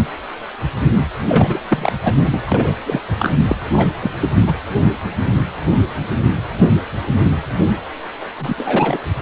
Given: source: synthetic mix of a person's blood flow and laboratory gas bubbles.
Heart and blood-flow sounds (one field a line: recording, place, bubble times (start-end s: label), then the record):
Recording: Doppler ultrasound of blood flow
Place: precordium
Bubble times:
1.28-1.59 s: bubbles
1.69-1.92 s: bubbles
2.01-2.42 s: bubbles
2.47-2.75 s: bubbles
2.85-3.01 s: bubbles
3.19-3.33 s: bubbles
3.48-3.55 s: bubbles
3.72-3.91 s: bubbles
4.00-4.11 s: bubbles
4.20-4.29 s: bubbles
4.46-4.55 s: bubbles
8.39-8.54 s: bubbles
8.57-9.02 s: bubbles
From the record:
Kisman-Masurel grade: 223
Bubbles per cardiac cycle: several, 3 to 8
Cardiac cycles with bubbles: 10 to 50%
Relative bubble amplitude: loud (0.450 to 0.775)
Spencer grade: 2 (many but less than half of the cardiac periods contain bubble signals, singularly or in groups)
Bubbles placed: anywhere in the cardiac cycle